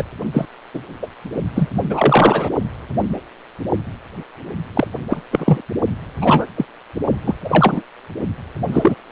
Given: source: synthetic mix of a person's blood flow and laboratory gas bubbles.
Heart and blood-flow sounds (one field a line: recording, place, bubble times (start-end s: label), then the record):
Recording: Doppler ultrasound of blood flow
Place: precordium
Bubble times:
0.00-0.03 s: bubbles
0.33-0.46 s: bubbles
0.74-0.80 s: bubbles
1.02-1.07 s: bubbles
1.55-1.70 s: bubbles
1.90-2.50 s: bubbles
4.75-4.87 s: bubbles
5.09-5.22 s: bubbles
5.31-5.61 s: bubbles
6.21-6.46 s: bubbles
6.57-6.65 s: bubbles
7.25-7.34 s: bubbles
7.44-7.82 s: bubbles
8.72-8.95 s: bubbles
From the record:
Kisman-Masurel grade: 233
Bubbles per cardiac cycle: several, 3 to 8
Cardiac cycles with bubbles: 50 to 99%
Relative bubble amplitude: loud (0.450 to 0.775)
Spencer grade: 3 (all of the cardiac periods contain showers or single bubble signals, but not dominating or overriding the cardiac motion signals)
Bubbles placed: only in the low amplitude regions of the cardiac cycle